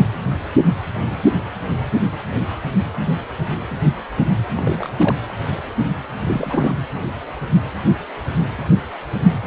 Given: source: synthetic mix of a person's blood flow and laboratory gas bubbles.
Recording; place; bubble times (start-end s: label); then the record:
Doppler ultrasound of blood flow; precordium
4.56-5.16 s: bubbles
6.26-6.75 s: bubbles
From the record:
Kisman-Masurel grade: 222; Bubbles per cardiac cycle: several, 3 to 8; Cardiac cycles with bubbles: 10 to 50%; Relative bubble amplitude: moderate (0.250 to 0.450); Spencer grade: 2 (many but less than half of the cardiac periods contain bubble signals, singularly or in groups); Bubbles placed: anywhere in the cardiac cycle